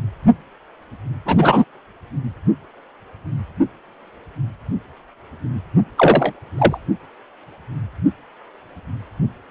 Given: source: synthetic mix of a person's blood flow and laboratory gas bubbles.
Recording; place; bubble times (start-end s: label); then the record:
Doppler ultrasound of blood flow; precordium
1.26-1.64 s: bubbles
5.97-6.33 s: bubbles
6.58-6.78 s: bubbles
From the record:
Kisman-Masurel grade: 123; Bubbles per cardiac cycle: 1 to 2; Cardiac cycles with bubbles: 10 to 50%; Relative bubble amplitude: loud (0.450 to 0.775); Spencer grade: 2 (many but less than half of the cardiac periods contain bubble signals, singularly or in groups); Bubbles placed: only in the low amplitude regions of the cardiac cycle